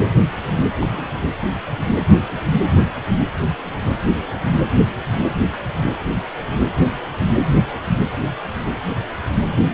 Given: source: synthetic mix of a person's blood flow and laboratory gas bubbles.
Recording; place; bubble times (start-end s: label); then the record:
Doppler ultrasound of blood flow; precordium
0.80-0.85 s: bubbles
0.92-1.02 s: bubbles
7.44-7.80 s: bubbles
From the record:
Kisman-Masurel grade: 211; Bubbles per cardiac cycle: several, 3 to 8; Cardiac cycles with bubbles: 1 to 10%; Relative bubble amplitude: barely perceptible (0.100 to 0.250); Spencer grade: 1 (occasional bubble signal discernible with the cardiac motion signal, with majority of cardiac periods free of bubbles); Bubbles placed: anywhere in the cardiac cycle